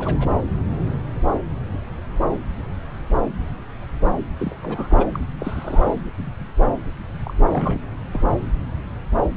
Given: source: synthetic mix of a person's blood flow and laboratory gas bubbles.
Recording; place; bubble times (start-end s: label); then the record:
Doppler ultrasound of blood flow; subclavian vein
0.00-0.27 s: bubbles
4.39-4.55 s: bubbles
4.62-5.06 s: bubbles
5.12-5.21 s: bubbles
5.39-5.95 s: bubbles
7.23-7.33 s: bubbles
7.50-7.79 s: bubbles
8.12-8.24 s: bubbles
From the record:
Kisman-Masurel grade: 221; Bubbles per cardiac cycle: several, 3 to 8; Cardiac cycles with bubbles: 10 to 50%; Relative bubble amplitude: barely perceptible (0.100 to 0.250); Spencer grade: 2 (many but less than half of the cardiac periods contain bubble signals, singularly or in groups); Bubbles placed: anywhere in the cardiac cycle